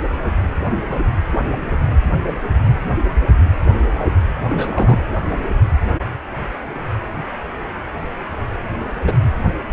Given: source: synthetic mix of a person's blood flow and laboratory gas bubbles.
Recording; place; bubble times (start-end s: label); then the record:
Doppler ultrasound of blood flow; precordium
0.90-0.98 s: bubbles
4.49-5.02 s: bubbles
9.05-9.14 s: bubbles
From the record:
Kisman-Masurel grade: 122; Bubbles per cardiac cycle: 1 to 2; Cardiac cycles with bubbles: 10 to 50%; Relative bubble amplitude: moderate (0.250 to 0.450); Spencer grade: 2 (many but less than half of the cardiac periods contain bubble signals, singularly or in groups); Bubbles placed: anywhere in the cardiac cycle